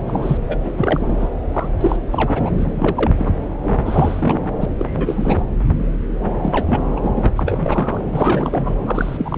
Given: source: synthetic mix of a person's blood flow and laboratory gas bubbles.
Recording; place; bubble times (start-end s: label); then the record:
Doppler ultrasound of blood flow; subclavian vein
0.06-0.38 s: bubbles
0.48-0.57 s: bubbles
0.64-1.28 s: bubbles
1.54-1.69 s: bubbles
1.81-1.96 s: bubbles
2.11-2.50 s: bubbles
2.56-3.12 s: bubbles
3.17-3.33 s: bubbles
3.61-4.35 s: bubbles
4.60-4.65 s: bubbles
4.78-5.42 s: bubbles
6.42-6.80 s: bubbles
6.96-7.09 s: bubbles
7.16-7.31 s: bubbles
7.36-8.01 s: bubbles
8.11-8.78 s: bubbles
8.86-9.38 s: bubbles
From the record:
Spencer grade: 3 (all of the cardiac periods contain showers or single bubble signals, but not dominating or overriding the cardiac motion signals); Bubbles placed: anywhere in the cardiac cycle